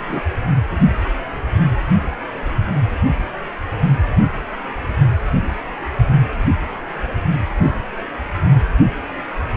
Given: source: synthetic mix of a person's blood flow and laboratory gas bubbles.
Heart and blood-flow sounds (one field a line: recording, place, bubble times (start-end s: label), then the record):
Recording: Doppler ultrasound of blood flow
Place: precordium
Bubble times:
0.08-0.21 s: bubbles
From the record:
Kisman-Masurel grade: 113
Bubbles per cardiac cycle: 1 to 2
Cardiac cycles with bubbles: 1 to 10%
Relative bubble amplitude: loud (0.450 to 0.775)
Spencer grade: 1 (occasional bubble signal discernible with the cardiac motion signal, with majority of cardiac periods free of bubbles)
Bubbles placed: only in the low amplitude regions of the cardiac cycle